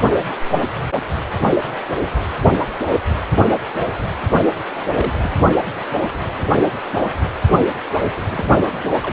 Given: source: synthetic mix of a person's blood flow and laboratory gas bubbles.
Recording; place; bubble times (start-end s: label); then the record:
Doppler ultrasound of blood flow; precordium
4.93-5.32 s: bubbles
8.29-8.45 s: bubbles
9.03-9.13 s: bubbles
From the record:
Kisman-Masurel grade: 121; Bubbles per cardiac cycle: 1 to 2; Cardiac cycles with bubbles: 10 to 50%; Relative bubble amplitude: barely perceptible (0.100 to 0.250); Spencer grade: 2 (many but less than half of the cardiac periods contain bubble signals, singularly or in groups); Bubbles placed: only in the low amplitude regions of the cardiac cycle